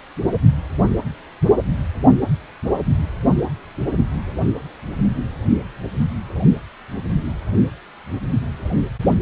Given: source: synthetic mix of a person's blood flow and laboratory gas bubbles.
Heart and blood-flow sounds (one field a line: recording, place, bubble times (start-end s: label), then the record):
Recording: Doppler ultrasound of blood flow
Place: precordium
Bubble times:
no bubbles
From the record:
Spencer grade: 0 (complete lack of bubble signals)